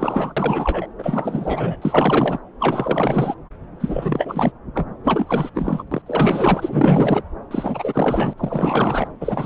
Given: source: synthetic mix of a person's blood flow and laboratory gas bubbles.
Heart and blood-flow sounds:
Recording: Doppler ultrasound of blood flow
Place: subclavian vein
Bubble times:
0.00-0.34 s: bubbles
0.37-0.86 s: bubbles
0.98-1.77 s: bubbles
1.81-2.40 s: bubbles
2.59-3.34 s: bubbles
3.80-4.52 s: bubbles
4.74-4.84 s: bubbles
5.04-5.50 s: bubbles
5.54-5.84 s: bubbles
5.91-6.02 s: bubbles
6.06-7.23 s: bubbles
7.51-8.33 s: bubbles
8.37-9.07 s: bubbles
9.21-9.46 s: bubbles
From the record:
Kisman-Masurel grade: 444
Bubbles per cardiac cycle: continuous sound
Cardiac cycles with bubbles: 100%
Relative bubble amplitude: maximal (0.775 to 0.999)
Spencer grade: 4 (maximum detectable bubble signal sounding continuously throughout systole and diastole of every cardiac period, and overriding the amplitude of the normal cardiac signals)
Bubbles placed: anywhere in the cardiac cycle

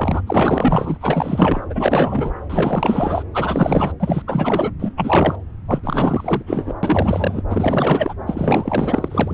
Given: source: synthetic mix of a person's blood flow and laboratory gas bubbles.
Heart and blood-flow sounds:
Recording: Doppler ultrasound of blood flow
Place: subclavian vein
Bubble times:
0.00-0.22 s: bubbles
0.27-0.98 s: bubbles
1.00-1.67 s: bubbles
1.70-2.33 s: bubbles
2.50-3.23 s: bubbles
3.33-3.92 s: bubbles
4.00-4.22 s: bubbles
4.27-4.71 s: bubbles
4.79-4.93 s: bubbles
4.97-5.37 s: bubbles
5.68-5.81 s: bubbles
5.84-6.43 s: bubbles
6.46-6.73 s: bubbles
6.83-7.43 s: bubbles
7.49-8.14 s: bubbles
8.26-9.34 s: bubbles
From the record:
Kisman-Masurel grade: 444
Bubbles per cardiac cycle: continuous sound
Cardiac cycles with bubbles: 100%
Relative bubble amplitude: maximal (0.775 to 0.999)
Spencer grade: 4 (maximum detectable bubble signal sounding continuously throughout systole and diastole of every cardiac period, and overriding the amplitude of the normal cardiac signals)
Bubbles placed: anywhere in the cardiac cycle

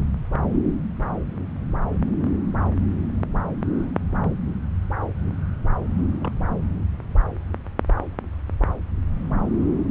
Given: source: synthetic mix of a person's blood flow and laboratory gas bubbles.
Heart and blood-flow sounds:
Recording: Doppler ultrasound of blood flow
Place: subclavian vein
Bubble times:
6.20-6.35 s: bubbles
From the record:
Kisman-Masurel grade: 111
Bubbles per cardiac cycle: 1 to 2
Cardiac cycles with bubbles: 1 to 10%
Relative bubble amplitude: barely perceptible (0.100 to 0.250)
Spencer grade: 1 (occasional bubble signal discernible with the cardiac motion signal, with majority of cardiac periods free of bubbles)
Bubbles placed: anywhere in the cardiac cycle

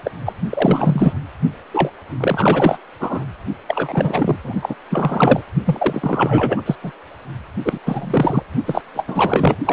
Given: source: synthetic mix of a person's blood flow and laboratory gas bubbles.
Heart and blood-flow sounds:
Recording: Doppler ultrasound of blood flow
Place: precordium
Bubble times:
0.04-0.11 s: bubbles
0.25-0.33 s: bubbles
0.50-1.13 s: bubbles
1.74-1.91 s: bubbles
2.20-2.77 s: bubbles
3.00-3.25 s: bubbles
3.67-4.38 s: bubbles
4.44-4.54 s: bubbles
4.62-4.75 s: bubbles
4.90-5.42 s: bubbles
5.66-6.62 s: bubbles
6.66-6.75 s: bubbles
6.83-6.92 s: bubbles
7.65-7.79 s: bubbles
7.86-8.43 s: bubbles
8.66-8.81 s: bubbles
8.95-9.04 s: bubbles
9.08-9.55 s: bubbles
9.65-9.73 s: bubbles
From the record:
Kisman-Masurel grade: 343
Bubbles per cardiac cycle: rolling drumbeat, 9 or more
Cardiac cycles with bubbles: 100%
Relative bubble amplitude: loud (0.450 to 0.775)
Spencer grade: 3 (all of the cardiac periods contain showers or single bubble signals, but not dominating or overriding the cardiac motion signals)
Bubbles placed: only in the low amplitude regions of the cardiac cycle

